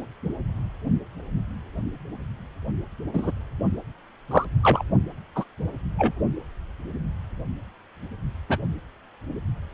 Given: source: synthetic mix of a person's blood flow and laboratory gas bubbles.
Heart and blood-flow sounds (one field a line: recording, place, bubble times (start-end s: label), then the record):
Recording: Doppler ultrasound of blood flow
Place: precordium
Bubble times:
3.14-3.31 s: bubbles
4.31-4.45 s: bubbles
4.63-4.83 s: bubbles
5.36-5.44 s: bubbles
5.99-6.12 s: bubbles
8.49-8.58 s: bubbles
From the record:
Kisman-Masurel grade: 122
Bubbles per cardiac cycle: 1 to 2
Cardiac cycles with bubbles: 10 to 50%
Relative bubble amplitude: moderate (0.250 to 0.450)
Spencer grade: 2 (many but less than half of the cardiac periods contain bubble signals, singularly or in groups)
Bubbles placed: only in the low amplitude regions of the cardiac cycle